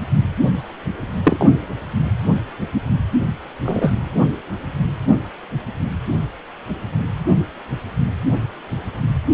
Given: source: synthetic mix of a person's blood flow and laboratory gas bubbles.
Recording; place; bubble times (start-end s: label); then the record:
Doppler ultrasound of blood flow; precordium
1.23-1.47 s: bubbles
3.65-3.92 s: bubbles
From the record:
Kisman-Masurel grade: 123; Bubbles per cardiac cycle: 1 to 2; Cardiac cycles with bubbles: 10 to 50%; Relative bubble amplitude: loud (0.450 to 0.775); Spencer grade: 2 (many but less than half of the cardiac periods contain bubble signals, singularly or in groups); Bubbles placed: only in the low amplitude regions of the cardiac cycle